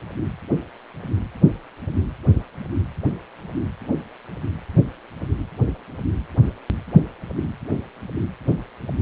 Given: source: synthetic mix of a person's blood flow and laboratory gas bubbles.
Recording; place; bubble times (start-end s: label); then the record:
Doppler ultrasound of blood flow; precordium
no bubbles
From the record:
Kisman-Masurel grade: 000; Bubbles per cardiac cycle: 0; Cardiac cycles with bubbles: 0%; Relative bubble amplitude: no bubbles discernible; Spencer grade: 0 (complete lack of bubble signals)